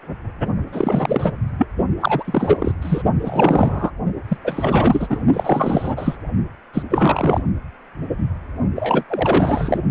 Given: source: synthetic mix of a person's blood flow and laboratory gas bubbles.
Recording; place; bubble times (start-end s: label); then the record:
Doppler ultrasound of blood flow; precordium
0.72-1.31 s: bubbles
1.57-1.67 s: bubbles
2.00-2.74 s: bubbles
2.81-3.02 s: bubbles
3.21-3.91 s: bubbles
4.28-4.37 s: bubbles
4.44-5.07 s: bubbles
5.10-5.23 s: bubbles
5.33-6.17 s: bubbles
6.74-6.83 s: bubbles
6.89-7.43 s: bubbles
8.75-9.04 s: bubbles
9.09-9.84 s: bubbles
From the record:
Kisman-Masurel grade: 332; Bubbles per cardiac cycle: rolling drumbeat, 9 or more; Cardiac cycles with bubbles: 50 to 99%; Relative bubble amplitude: moderate (0.250 to 0.450); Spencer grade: 3 (all of the cardiac periods contain showers or single bubble signals, but not dominating or overriding the cardiac motion signals); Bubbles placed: only in the low amplitude regions of the cardiac cycle